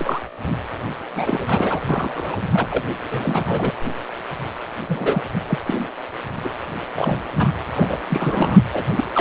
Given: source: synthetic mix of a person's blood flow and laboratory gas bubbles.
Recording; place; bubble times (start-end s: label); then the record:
Doppler ultrasound of blood flow; precordium
0.00-0.21 s: bubbles
0.45-0.53 s: bubbles
1.15-1.80 s: bubbles
1.87-2.36 s: bubbles
2.51-2.83 s: bubbles
3.11-3.73 s: bubbles
4.89-5.22 s: bubbles
5.48-5.59 s: bubbles
5.66-5.88 s: bubbles
6.45-6.49 s: bubbles
6.95-7.23 s: bubbles
7.35-7.52 s: bubbles
7.75-7.99 s: bubbles
8.09-8.59 s: bubbles
8.72-8.84 s: bubbles
8.96-9.04 s: bubbles
9.14-9.21 s: bubbles
From the record:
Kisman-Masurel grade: 242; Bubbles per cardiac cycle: several, 3 to 8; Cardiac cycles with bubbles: 100%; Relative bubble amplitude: moderate (0.250 to 0.450); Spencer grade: 3 (all of the cardiac periods contain showers or single bubble signals, but not dominating or overriding the cardiac motion signals); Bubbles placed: anywhere in the cardiac cycle